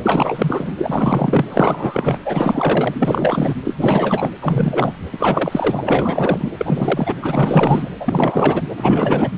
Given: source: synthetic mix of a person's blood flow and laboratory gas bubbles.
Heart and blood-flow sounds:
Doppler ultrasound of blood flow; precordium
0.00-0.73 s: bubbles
0.77-1.46 s: bubbles
1.49-2.20 s: bubbles
2.24-2.95 s: bubbles
2.99-3.54 s: bubbles
3.64-4.31 s: bubbles
4.41-4.94 s: bubbles
5.12-6.50 s: bubbles
6.57-7.16 s: bubbles
7.22-7.89 s: bubbles
8.00-8.62 s: bubbles
8.77-9.31 s: bubbles
From the record:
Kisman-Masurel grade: 444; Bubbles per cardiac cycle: continuous sound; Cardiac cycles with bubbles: 100%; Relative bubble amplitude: maximal (0.775 to 0.999); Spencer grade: 4 (maximum detectable bubble signal sounding continuously throughout systole and diastole of every cardiac period, and overriding the amplitude of the normal cardiac signals); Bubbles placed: anywhere in the cardiac cycle

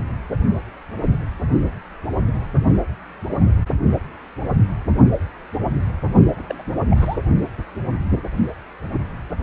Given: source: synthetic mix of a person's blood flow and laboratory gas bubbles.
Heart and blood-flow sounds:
Doppler ultrasound of blood flow; precordium
6.36-6.45 s: bubbles
6.49-6.54 s: bubbles
6.58-6.62 s: bubbles
6.90-7.18 s: bubbles
From the record:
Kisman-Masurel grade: 211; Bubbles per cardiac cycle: several, 3 to 8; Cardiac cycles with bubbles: 1 to 10%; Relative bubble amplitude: barely perceptible (0.100 to 0.250); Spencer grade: 1 (occasional bubble signal discernible with the cardiac motion signal, with majority of cardiac periods free of bubbles); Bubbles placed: only in the low amplitude regions of the cardiac cycle

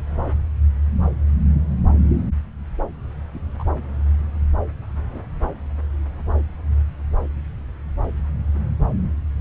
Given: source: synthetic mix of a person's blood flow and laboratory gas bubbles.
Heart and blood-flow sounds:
Doppler ultrasound of blood flow; subclavian vein
3.33-3.39 s: bubbles
3.58-3.64 s: bubbles
5.11-5.21 s: bubbles
From the record:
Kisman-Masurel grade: 121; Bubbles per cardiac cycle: 1 to 2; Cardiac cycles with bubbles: 10 to 50%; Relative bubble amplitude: barely perceptible (0.100 to 0.250); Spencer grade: 2 (many but less than half of the cardiac periods contain bubble signals, singularly or in groups); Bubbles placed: anywhere in the cardiac cycle

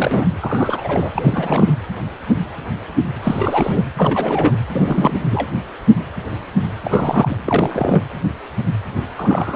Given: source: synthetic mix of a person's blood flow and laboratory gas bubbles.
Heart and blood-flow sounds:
Doppler ultrasound of blood flow; precordium
0.00-0.25 s: bubbles
0.40-1.10 s: bubbles
1.16-1.72 s: bubbles
3.23-3.82 s: bubbles
3.97-4.56 s: bubbles
4.72-5.49 s: bubbles
6.85-7.43 s: bubbles
7.46-8.04 s: bubbles
9.17-9.56 s: bubbles
From the record:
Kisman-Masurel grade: 332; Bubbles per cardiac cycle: rolling drumbeat, 9 or more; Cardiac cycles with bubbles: 50 to 99%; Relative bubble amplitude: moderate (0.250 to 0.450); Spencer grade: 3 (all of the cardiac periods contain showers or single bubble signals, but not dominating or overriding the cardiac motion signals); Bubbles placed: anywhere in the cardiac cycle

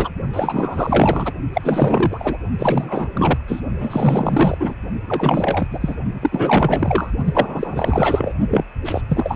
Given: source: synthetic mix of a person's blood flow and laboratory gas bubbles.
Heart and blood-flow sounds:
Doppler ultrasound of blood flow; precordium
0.00-0.10 s: bubbles
0.33-1.32 s: bubbles
1.53-2.38 s: bubbles
2.58-3.08 s: bubbles
3.11-3.38 s: bubbles
3.48-3.61 s: bubbles
3.78-4.74 s: bubbles
5.06-5.95 s: bubbles
6.21-7.11 s: bubbles
7.24-8.35 s: bubbles
8.50-8.64 s: bubbles
8.85-9.02 s: bubbles
9.09-9.36 s: bubbles
From the record:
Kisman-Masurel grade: 444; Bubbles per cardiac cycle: continuous sound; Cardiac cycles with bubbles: 100%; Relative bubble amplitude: maximal (0.775 to 0.999); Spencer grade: 4 (maximum detectable bubble signal sounding continuously throughout systole and diastole of every cardiac period, and overriding the amplitude of the normal cardiac signals); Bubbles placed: only in the low amplitude regions of the cardiac cycle

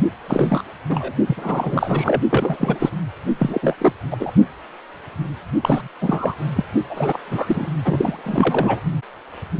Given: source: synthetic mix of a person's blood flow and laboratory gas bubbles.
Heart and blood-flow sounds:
Doppler ultrasound of blood flow; precordium
0.28-0.62 s: bubbles
0.89-1.13 s: bubbles
1.27-2.21 s: bubbles
2.30-2.90 s: bubbles
3.39-3.75 s: bubbles
3.79-3.92 s: bubbles
4.10-4.17 s: bubbles
4.20-4.31 s: bubbles
5.60-5.88 s: bubbles
6.00-6.34 s: bubbles
6.55-6.64 s: bubbles
6.89-7.19 s: bubbles
7.28-7.67 s: bubbles
7.84-8.81 s: bubbles
From the record:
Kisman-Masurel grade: 332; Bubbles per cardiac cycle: rolling drumbeat, 9 or more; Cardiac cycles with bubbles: 50 to 99%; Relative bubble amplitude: moderate (0.250 to 0.450); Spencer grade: 3 (all of the cardiac periods contain showers or single bubble signals, but not dominating or overriding the cardiac motion signals); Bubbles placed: only in the low amplitude regions of the cardiac cycle

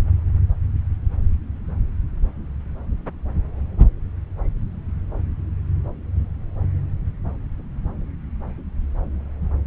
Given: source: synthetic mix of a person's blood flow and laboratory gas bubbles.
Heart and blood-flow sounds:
Doppler ultrasound of blood flow; subclavian vein
no bubbles
From the record:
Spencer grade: 0 (complete lack of bubble signals)

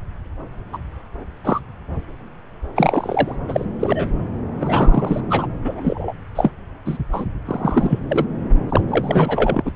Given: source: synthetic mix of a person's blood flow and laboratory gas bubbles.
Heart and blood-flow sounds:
Doppler ultrasound of blood flow; subclavian vein
0.72-0.77 s: bubbles
1.44-1.60 s: bubbles
2.75-3.36 s: bubbles
3.48-3.65 s: bubbles
3.79-4.08 s: bubbles
4.60-5.21 s: bubbles
5.29-5.46 s: bubbles
5.64-6.12 s: bubbles
6.35-6.51 s: bubbles
6.85-6.98 s: bubbles
7.12-7.25 s: bubbles
7.45-8.00 s: bubbles
8.09-8.25 s: bubbles
8.69-8.81 s: bubbles
8.89-9.71 s: bubbles
From the record:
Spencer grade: 3 (all of the cardiac periods contain showers or single bubble signals, but not dominating or overriding the cardiac motion signals); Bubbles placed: anywhere in the cardiac cycle

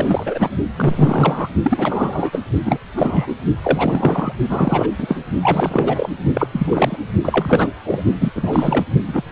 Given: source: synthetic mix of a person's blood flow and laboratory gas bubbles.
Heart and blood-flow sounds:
Doppler ultrasound of blood flow; precordium
0.00-0.49 s: bubbles
0.77-1.49 s: bubbles
1.62-2.40 s: bubbles
2.65-2.79 s: bubbles
2.96-3.35 s: bubbles
3.64-4.32 s: bubbles
4.49-4.88 s: bubbles
4.98-5.23 s: bubbles
5.42-6.09 s: bubbles
6.33-6.47 s: bubbles
6.52-6.99 s: bubbles
7.22-7.72 s: bubbles
7.84-8.03 s: bubbles
8.21-8.31 s: bubbles
8.36-8.85 s: bubbles
9.06-9.22 s: bubbles
From the record:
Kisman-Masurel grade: 343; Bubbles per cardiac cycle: rolling drumbeat, 9 or more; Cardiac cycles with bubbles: 100%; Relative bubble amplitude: loud (0.450 to 0.775); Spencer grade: 3 (all of the cardiac periods contain showers or single bubble signals, but not dominating or overriding the cardiac motion signals); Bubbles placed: only in the low amplitude regions of the cardiac cycle

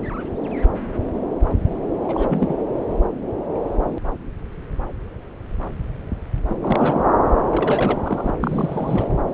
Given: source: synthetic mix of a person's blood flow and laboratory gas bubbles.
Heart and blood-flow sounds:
Doppler ultrasound of blood flow; subclavian vein
2.04-2.70 s: bubbles
6.49-6.54 s: bubbles
6.62-7.06 s: bubbles
7.51-8.31 s: bubbles
8.40-9.07 s: bubbles
From the record:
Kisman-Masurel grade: 222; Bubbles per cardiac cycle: several, 3 to 8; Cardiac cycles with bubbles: 10 to 50%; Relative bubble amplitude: moderate (0.250 to 0.450); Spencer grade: 2 (many but less than half of the cardiac periods contain bubble signals, singularly or in groups); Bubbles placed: anywhere in the cardiac cycle

